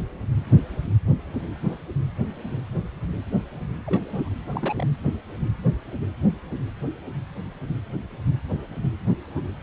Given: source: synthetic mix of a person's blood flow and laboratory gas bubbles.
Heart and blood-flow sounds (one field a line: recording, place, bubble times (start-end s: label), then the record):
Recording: Doppler ultrasound of blood flow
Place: precordium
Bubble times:
1.63-1.76 s: bubbles
3.85-4.29 s: bubbles
4.52-4.86 s: bubbles
9.35-9.42 s: bubbles
From the record:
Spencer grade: 2 (many but less than half of the cardiac periods contain bubble signals, singularly or in groups)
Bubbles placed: anywhere in the cardiac cycle